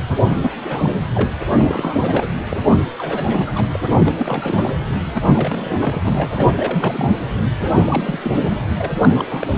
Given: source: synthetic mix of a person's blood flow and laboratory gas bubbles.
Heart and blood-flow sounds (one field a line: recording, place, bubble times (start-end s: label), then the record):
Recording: Doppler ultrasound of blood flow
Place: precordium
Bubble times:
0.26-0.51 s: bubbles
0.69-0.90 s: bubbles
1.15-1.30 s: bubbles
1.55-2.28 s: bubbles
2.50-2.58 s: bubbles
2.98-3.67 s: bubbles
3.75-3.80 s: bubbles
3.93-4.12 s: bubbles
4.18-4.75 s: bubbles
5.14-5.76 s: bubbles
5.80-6.01 s: bubbles
6.07-6.51 s: bubbles
6.57-7.12 s: bubbles
7.59-7.67 s: bubbles
7.86-8.19 s: bubbles
8.23-8.61 s: bubbles
8.77-8.95 s: bubbles
9.01-9.24 s: bubbles
9.30-9.57 s: bubbles
From the record:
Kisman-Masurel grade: 342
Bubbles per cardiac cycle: rolling drumbeat, 9 or more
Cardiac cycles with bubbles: 100%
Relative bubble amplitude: moderate (0.250 to 0.450)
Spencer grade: 3 (all of the cardiac periods contain showers or single bubble signals, but not dominating or overriding the cardiac motion signals)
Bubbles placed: anywhere in the cardiac cycle